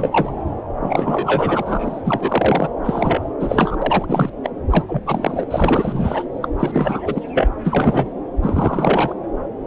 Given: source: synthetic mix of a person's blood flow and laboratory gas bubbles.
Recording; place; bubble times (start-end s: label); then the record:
Doppler ultrasound of blood flow; subclavian vein
0.00-0.33 s: bubbles
0.79-2.01 s: bubbles
2.04-2.70 s: bubbles
2.83-3.21 s: bubbles
3.39-3.76 s: bubbles
3.81-4.30 s: bubbles
4.43-4.50 s: bubbles
4.70-4.84 s: bubbles
4.88-5.02 s: bubbles
5.06-5.46 s: bubbles
5.50-6.23 s: bubbles
6.42-6.48 s: bubbles
6.59-7.22 s: bubbles
7.33-7.48 s: bubbles
7.64-8.12 s: bubbles
8.43-9.15 s: bubbles
From the record:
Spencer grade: 3 (all of the cardiac periods contain showers or single bubble signals, but not dominating or overriding the cardiac motion signals); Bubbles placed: anywhere in the cardiac cycle